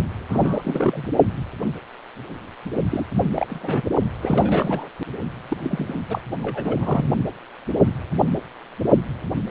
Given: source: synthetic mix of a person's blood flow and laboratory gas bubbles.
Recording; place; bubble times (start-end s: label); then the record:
Doppler ultrasound of blood flow; precordium
0.29-1.09 s: bubbles
2.91-3.04 s: bubbles
3.36-3.82 s: bubbles
4.22-4.90 s: bubbles
5.48-5.57 s: bubbles
5.61-6.01 s: bubbles
6.08-6.21 s: bubbles
6.43-6.77 s: bubbles
6.80-7.09 s: bubbles
From the record:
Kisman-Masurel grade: 332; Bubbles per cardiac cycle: rolling drumbeat, 9 or more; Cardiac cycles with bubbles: 50 to 99%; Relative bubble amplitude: moderate (0.250 to 0.450); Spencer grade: 3 (all of the cardiac periods contain showers or single bubble signals, but not dominating or overriding the cardiac motion signals); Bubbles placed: only in the low amplitude regions of the cardiac cycle